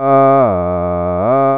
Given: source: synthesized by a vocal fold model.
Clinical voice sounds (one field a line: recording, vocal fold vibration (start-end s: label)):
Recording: sustained vowel that changes in the middle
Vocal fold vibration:
0.00-0.37 s: 136.4 Hz, open quotient 0.35
0.57-1.17 s: 88.2 Hz, open quotient 0.41
1.37-1.58 s: 136.4 Hz, open quotient 0.35